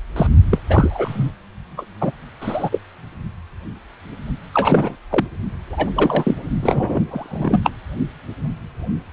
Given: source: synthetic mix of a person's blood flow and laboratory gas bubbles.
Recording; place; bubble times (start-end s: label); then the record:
Doppler ultrasound of blood flow; precordium
0.16-0.27 s: bubbles
0.51-0.59 s: bubbles
0.69-1.31 s: bubbles
1.77-1.85 s: bubbles
2.00-2.12 s: bubbles
2.41-2.79 s: bubbles
4.54-4.96 s: bubbles
5.09-5.26 s: bubbles
5.71-5.92 s: bubbles
5.95-6.34 s: bubbles
6.62-7.04 s: bubbles
7.10-7.70 s: bubbles
From the record:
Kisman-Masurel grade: 233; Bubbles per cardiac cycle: several, 3 to 8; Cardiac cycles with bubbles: 50 to 99%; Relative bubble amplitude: loud (0.450 to 0.775); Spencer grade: 3 (all of the cardiac periods contain showers or single bubble signals, but not dominating or overriding the cardiac motion signals); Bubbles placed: only in the low amplitude regions of the cardiac cycle